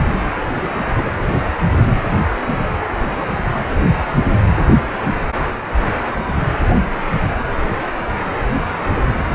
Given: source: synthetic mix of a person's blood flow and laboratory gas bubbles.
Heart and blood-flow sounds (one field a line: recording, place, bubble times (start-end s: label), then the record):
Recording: Doppler ultrasound of blood flow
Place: precordium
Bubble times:
0.35-0.41 s: bubbles
0.49-0.69 s: bubbles
0.95-1.12 s: bubbles
From the record:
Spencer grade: 2 (many but less than half of the cardiac periods contain bubble signals, singularly or in groups)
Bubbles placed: anywhere in the cardiac cycle